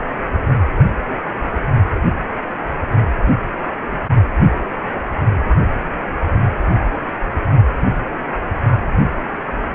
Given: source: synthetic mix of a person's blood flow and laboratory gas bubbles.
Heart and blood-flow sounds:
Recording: Doppler ultrasound of blood flow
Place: precordium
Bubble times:
3.92-3.99 s: bubbles
4.16-4.22 s: bubbles
From the record:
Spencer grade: 1 (occasional bubble signal discernible with the cardiac motion signal, with majority of cardiac periods free of bubbles)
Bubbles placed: anywhere in the cardiac cycle

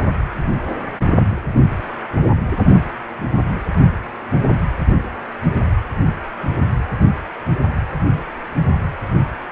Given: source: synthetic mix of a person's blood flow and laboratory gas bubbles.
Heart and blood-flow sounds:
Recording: Doppler ultrasound of blood flow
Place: precordium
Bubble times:
no bubbles
From the record:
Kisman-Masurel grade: 000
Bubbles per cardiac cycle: 0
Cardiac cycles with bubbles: 0%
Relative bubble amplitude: no bubbles discernible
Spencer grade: 0 (complete lack of bubble signals)

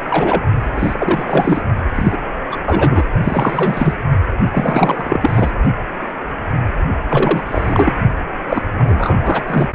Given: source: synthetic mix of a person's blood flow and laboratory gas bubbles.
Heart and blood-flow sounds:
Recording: Doppler ultrasound of blood flow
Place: precordium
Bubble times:
0.00-0.43 s: bubbles
0.73-1.62 s: bubbles
1.95-2.19 s: bubbles
2.51-2.57 s: bubbles
2.67-3.03 s: bubbles
3.25-3.94 s: bubbles
4.52-5.51 s: bubbles
7.09-7.42 s: bubbles
7.46-7.92 s: bubbles
8.49-8.62 s: bubbles
8.79-9.43 s: bubbles
9.48-9.68 s: bubbles
From the record:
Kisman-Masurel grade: 333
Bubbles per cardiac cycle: rolling drumbeat, 9 or more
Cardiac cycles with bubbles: 50 to 99%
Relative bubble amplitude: loud (0.450 to 0.775)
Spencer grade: 3 (all of the cardiac periods contain showers or single bubble signals, but not dominating or overriding the cardiac motion signals)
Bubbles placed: only in the low amplitude regions of the cardiac cycle

